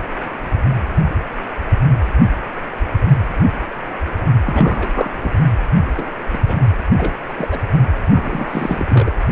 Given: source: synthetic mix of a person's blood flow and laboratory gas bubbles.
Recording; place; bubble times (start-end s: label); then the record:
Doppler ultrasound of blood flow; precordium
4.44-5.10 s: bubbles
5.21-5.33 s: bubbles
5.97-6.09 s: bubbles
6.33-6.38 s: bubbles
6.47-6.67 s: bubbles
6.98-7.15 s: bubbles
7.28-7.34 s: bubbles
7.38-7.66 s: bubbles
8.10-8.86 s: bubbles
8.89-9.12 s: bubbles
From the record:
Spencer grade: 3 (all of the cardiac periods contain showers or single bubble signals, but not dominating or overriding the cardiac motion signals); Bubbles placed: anywhere in the cardiac cycle